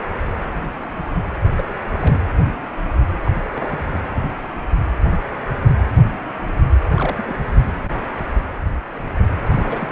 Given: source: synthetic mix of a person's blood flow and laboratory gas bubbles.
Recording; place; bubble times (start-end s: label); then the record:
Doppler ultrasound of blood flow; precordium
1.56-1.64 s: bubbles
1.88-2.19 s: bubbles
3.26-3.31 s: bubbles
3.54-3.83 s: bubbles
3.93-4.00 s: bubbles
6.92-7.39 s: bubbles
9.49-9.89 s: bubbles
From the record:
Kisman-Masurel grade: 221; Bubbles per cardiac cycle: several, 3 to 8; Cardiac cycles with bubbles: 10 to 50%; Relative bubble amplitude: barely perceptible (0.100 to 0.250); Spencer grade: 2 (many but less than half of the cardiac periods contain bubble signals, singularly or in groups); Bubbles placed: anywhere in the cardiac cycle